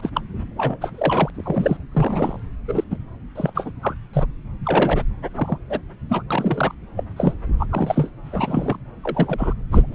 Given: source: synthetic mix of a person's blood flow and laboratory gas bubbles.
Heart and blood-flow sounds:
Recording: Doppler ultrasound of blood flow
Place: subclavian vein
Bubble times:
0.00-0.10 s: bubbles
0.14-0.21 s: bubbles
0.57-1.30 s: bubbles
1.35-1.77 s: bubbles
1.92-2.40 s: bubbles
2.68-2.84 s: bubbles
2.91-2.97 s: bubbles
3.36-3.72 s: bubbles
3.82-3.95 s: bubbles
4.13-4.26 s: bubbles
4.63-5.04 s: bubbles
5.36-5.58 s: bubbles
5.69-5.79 s: bubbles
6.10-6.22 s: bubbles
6.31-6.75 s: bubbles
6.96-7.04 s: bubbles
7.16-7.34 s: bubbles
7.60-7.67 s: bubbles
7.70-8.10 s: bubbles
8.26-8.77 s: bubbles
9.04-9.54 s: bubbles
9.71-9.95 s: bubbles
From the record:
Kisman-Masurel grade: 242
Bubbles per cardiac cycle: several, 3 to 8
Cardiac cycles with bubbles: 100%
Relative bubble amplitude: moderate (0.250 to 0.450)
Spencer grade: 3 (all of the cardiac periods contain showers or single bubble signals, but not dominating or overriding the cardiac motion signals)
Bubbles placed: anywhere in the cardiac cycle

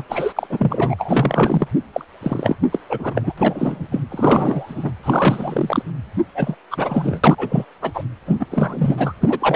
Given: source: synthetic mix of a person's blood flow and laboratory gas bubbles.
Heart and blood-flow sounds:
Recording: Doppler ultrasound of blood flow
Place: precordium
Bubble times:
0.00-0.04 s: bubbles
0.09-0.33 s: bubbles
0.36-0.47 s: bubbles
0.50-0.95 s: bubbles
0.98-1.67 s: bubbles
1.93-2.05 s: bubbles
2.23-2.56 s: bubbles
2.72-2.79 s: bubbles
2.89-3.33 s: bubbles
3.37-3.88 s: bubbles
3.92-4.00 s: bubbles
4.11-4.92 s: bubbles
5.03-5.83 s: bubbles
6.34-6.55 s: bubbles
6.71-7.21 s: bubbles
7.24-7.66 s: bubbles
7.82-8.03 s: bubbles
8.26-8.46 s: bubbles
8.50-9.13 s: bubbles
9.21-9.56 s: bubbles
From the record:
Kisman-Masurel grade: 343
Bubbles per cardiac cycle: rolling drumbeat, 9 or more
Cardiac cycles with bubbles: 100%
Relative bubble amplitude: loud (0.450 to 0.775)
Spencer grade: 3 (all of the cardiac periods contain showers or single bubble signals, but not dominating or overriding the cardiac motion signals)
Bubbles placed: anywhere in the cardiac cycle

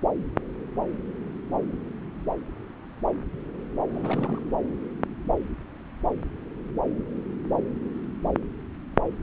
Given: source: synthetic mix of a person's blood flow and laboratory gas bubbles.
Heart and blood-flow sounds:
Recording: Doppler ultrasound of blood flow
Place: subclavian vein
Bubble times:
3.94-4.39 s: bubbles
From the record:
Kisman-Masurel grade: 211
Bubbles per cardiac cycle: several, 3 to 8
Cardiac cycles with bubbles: 1 to 10%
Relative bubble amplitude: barely perceptible (0.100 to 0.250)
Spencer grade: 1 (occasional bubble signal discernible with the cardiac motion signal, with majority of cardiac periods free of bubbles)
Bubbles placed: anywhere in the cardiac cycle

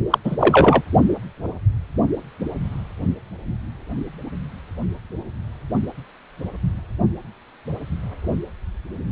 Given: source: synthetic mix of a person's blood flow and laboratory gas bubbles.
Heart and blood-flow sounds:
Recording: Doppler ultrasound of blood flow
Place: precordium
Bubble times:
0.10-0.18 s: bubbles
0.24-0.35 s: bubbles
0.38-0.82 s: bubbles
From the record:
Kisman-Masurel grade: 213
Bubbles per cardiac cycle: several, 3 to 8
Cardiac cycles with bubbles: 1 to 10%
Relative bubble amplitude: loud (0.450 to 0.775)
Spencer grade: 1 (occasional bubble signal discernible with the cardiac motion signal, with majority of cardiac periods free of bubbles)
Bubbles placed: only in the low amplitude regions of the cardiac cycle

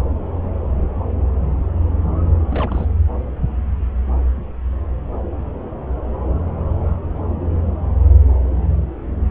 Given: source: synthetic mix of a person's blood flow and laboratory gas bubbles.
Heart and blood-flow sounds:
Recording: Doppler ultrasound of blood flow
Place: subclavian vein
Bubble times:
2.50-2.86 s: bubbles
From the record:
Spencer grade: 1 (occasional bubble signal discernible with the cardiac motion signal, with majority of cardiac periods free of bubbles)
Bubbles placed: anywhere in the cardiac cycle

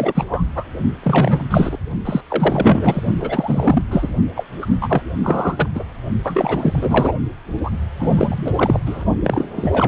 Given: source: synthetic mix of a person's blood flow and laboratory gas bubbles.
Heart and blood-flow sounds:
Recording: Doppler ultrasound of blood flow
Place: precordium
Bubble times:
0.00-0.45 s: bubbles
0.55-0.64 s: bubbles
1.02-1.77 s: bubbles
2.05-2.21 s: bubbles
2.29-3.01 s: bubbles
3.20-3.82 s: bubbles
3.91-4.11 s: bubbles
4.34-4.44 s: bubbles
4.61-4.67 s: bubbles
4.80-5.01 s: bubbles
5.23-5.69 s: bubbles
5.75-5.84 s: bubbles
6.24-7.12 s: bubbles
7.63-7.71 s: bubbles
7.99-8.52 s: bubbles
8.56-8.80 s: bubbles
8.86-9.04 s: bubbles
9.24-9.43 s: bubbles
9.56-9.88 s: bubbles
From the record:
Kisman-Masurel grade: 343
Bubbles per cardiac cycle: rolling drumbeat, 9 or more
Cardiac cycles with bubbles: 100%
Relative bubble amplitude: loud (0.450 to 0.775)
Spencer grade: 3 (all of the cardiac periods contain showers or single bubble signals, but not dominating or overriding the cardiac motion signals)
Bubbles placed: only in the low amplitude regions of the cardiac cycle

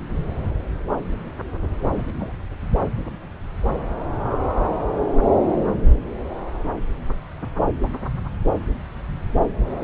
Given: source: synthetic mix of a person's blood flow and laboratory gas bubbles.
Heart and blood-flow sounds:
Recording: Doppler ultrasound of blood flow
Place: subclavian vein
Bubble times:
1.93-2.04 s: bubbles
2.18-2.33 s: bubbles
From the record:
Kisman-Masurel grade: 111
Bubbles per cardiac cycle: 1 to 2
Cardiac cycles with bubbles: 1 to 10%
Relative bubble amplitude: barely perceptible (0.100 to 0.250)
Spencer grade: 1 (occasional bubble signal discernible with the cardiac motion signal, with majority of cardiac periods free of bubbles)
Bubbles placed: anywhere in the cardiac cycle

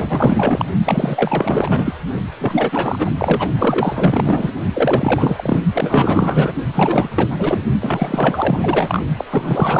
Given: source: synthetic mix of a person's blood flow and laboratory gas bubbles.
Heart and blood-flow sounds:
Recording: Doppler ultrasound of blood flow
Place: precordium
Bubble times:
0.00-0.66 s: bubbles
0.85-1.96 s: bubbles
2.39-3.10 s: bubbles
3.17-3.50 s: bubbles
3.58-4.52 s: bubbles
4.73-5.59 s: bubbles
5.72-6.53 s: bubbles
6.72-7.61 s: bubbles
7.80-9.03 s: bubbles
9.17-9.25 s: bubbles
9.31-9.80 s: bubbles
From the record:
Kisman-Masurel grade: 444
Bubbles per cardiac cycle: continuous sound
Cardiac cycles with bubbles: 100%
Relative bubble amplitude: maximal (0.775 to 0.999)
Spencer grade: 4 (maximum detectable bubble signal sounding continuously throughout systole and diastole of every cardiac period, and overriding the amplitude of the normal cardiac signals)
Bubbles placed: only in the low amplitude regions of the cardiac cycle

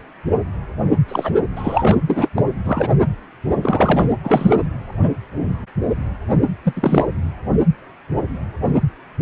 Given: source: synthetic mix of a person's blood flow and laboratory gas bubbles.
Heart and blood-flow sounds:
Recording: Doppler ultrasound of blood flow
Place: precordium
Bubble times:
1.08-1.31 s: bubbles
1.56-1.97 s: bubbles
2.06-2.28 s: bubbles
2.35-2.45 s: bubbles
2.64-2.94 s: bubbles
3.61-4.13 s: bubbles
4.24-4.56 s: bubbles
6.65-7.09 s: bubbles
From the record:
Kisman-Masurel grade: 223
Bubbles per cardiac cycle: several, 3 to 8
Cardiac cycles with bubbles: 10 to 50%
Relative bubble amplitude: loud (0.450 to 0.775)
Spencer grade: 2 (many but less than half of the cardiac periods contain bubble signals, singularly or in groups)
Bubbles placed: anywhere in the cardiac cycle

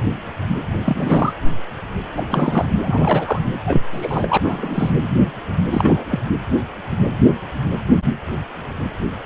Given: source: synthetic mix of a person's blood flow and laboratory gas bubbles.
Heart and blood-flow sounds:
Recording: Doppler ultrasound of blood flow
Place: precordium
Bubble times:
0.84-1.33 s: bubbles
2.16-2.23 s: bubbles
2.29-2.67 s: bubbles
2.82-3.40 s: bubbles
3.65-3.82 s: bubbles
3.91-4.38 s: bubbles
4.43-4.99 s: bubbles
5.71-6.20 s: bubbles
From the record:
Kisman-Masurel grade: 223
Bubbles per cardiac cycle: several, 3 to 8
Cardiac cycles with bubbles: 10 to 50%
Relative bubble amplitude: loud (0.450 to 0.775)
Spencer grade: 2 (many but less than half of the cardiac periods contain bubble signals, singularly or in groups)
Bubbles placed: anywhere in the cardiac cycle

